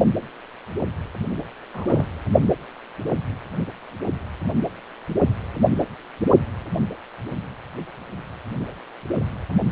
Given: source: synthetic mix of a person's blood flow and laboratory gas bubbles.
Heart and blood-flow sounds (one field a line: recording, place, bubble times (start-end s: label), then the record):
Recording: Doppler ultrasound of blood flow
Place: precordium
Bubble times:
0.00-0.05 s: bubbles
1.73-2.06 s: bubbles
From the record:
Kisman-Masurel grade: 121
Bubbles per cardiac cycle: 1 to 2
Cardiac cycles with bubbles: 10 to 50%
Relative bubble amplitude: barely perceptible (0.100 to 0.250)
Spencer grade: 2 (many but less than half of the cardiac periods contain bubble signals, singularly or in groups)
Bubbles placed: anywhere in the cardiac cycle